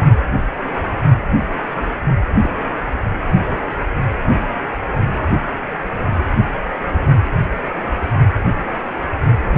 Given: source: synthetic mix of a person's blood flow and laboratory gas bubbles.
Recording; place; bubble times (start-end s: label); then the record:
Doppler ultrasound of blood flow; precordium
1.82-1.87 s: bubbles
2.42-2.50 s: bubbles
5.07-5.17 s: bubbles
From the record:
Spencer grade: 2 (many but less than half of the cardiac periods contain bubble signals, singularly or in groups); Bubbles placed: anywhere in the cardiac cycle